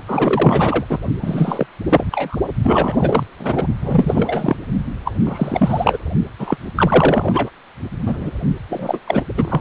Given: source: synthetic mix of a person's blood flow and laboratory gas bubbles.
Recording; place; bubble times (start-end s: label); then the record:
Doppler ultrasound of blood flow; precordium
0.08-0.85 s: bubbles
0.90-0.98 s: bubbles
1.22-1.67 s: bubbles
1.89-2.04 s: bubbles
2.12-2.37 s: bubbles
2.63-3.24 s: bubbles
3.39-3.68 s: bubbles
3.81-4.57 s: bubbles
5.04-5.12 s: bubbles
5.25-5.97 s: bubbles
6.38-6.57 s: bubbles
6.76-7.50 s: bubbles
8.06-8.30 s: bubbles
8.69-8.99 s: bubbles
9.07-9.23 s: bubbles
9.36-9.61 s: bubbles
From the record:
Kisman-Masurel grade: 343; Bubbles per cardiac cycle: rolling drumbeat, 9 or more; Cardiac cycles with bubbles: 100%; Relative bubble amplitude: loud (0.450 to 0.775); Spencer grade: 3 (all of the cardiac periods contain showers or single bubble signals, but not dominating or overriding the cardiac motion signals); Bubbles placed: only in the low amplitude regions of the cardiac cycle